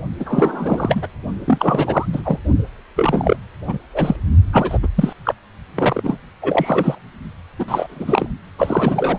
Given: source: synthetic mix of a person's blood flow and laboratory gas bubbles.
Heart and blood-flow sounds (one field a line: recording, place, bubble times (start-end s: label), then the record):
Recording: Doppler ultrasound of blood flow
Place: precordium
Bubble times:
0.19-1.08 s: bubbles
1.46-2.05 s: bubbles
2.12-2.39 s: bubbles
2.96-3.36 s: bubbles
3.67-3.79 s: bubbles
3.92-4.16 s: bubbles
4.52-4.78 s: bubbles
4.83-4.88 s: bubbles
4.96-5.13 s: bubbles
5.25-5.33 s: bubbles
5.75-6.18 s: bubbles
6.42-6.99 s: bubbles
7.58-7.65 s: bubbles
7.68-8.27 s: bubbles
8.58-9.19 s: bubbles
From the record:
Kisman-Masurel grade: 343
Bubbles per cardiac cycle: rolling drumbeat, 9 or more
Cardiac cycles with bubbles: 100%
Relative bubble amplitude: loud (0.450 to 0.775)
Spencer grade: 3 (all of the cardiac periods contain showers or single bubble signals, but not dominating or overriding the cardiac motion signals)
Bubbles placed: only in the low amplitude regions of the cardiac cycle